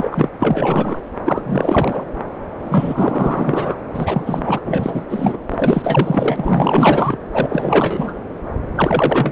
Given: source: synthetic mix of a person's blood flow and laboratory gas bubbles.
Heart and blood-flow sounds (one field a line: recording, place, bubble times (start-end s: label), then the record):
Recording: Doppler ultrasound of blood flow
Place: subclavian vein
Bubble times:
0.00-0.29 s: bubbles
0.40-0.98 s: bubbles
1.26-1.43 s: bubbles
1.46-2.04 s: bubbles
2.60-3.77 s: bubbles
3.90-4.59 s: bubbles
4.62-5.05 s: bubbles
5.09-5.37 s: bubbles
5.50-7.18 s: bubbles
7.32-8.14 s: bubbles
8.75-9.32 s: bubbles
From the record:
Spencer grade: 4 (maximum detectable bubble signal sounding continuously throughout systole and diastole of every cardiac period, and overriding the amplitude of the normal cardiac signals)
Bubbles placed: anywhere in the cardiac cycle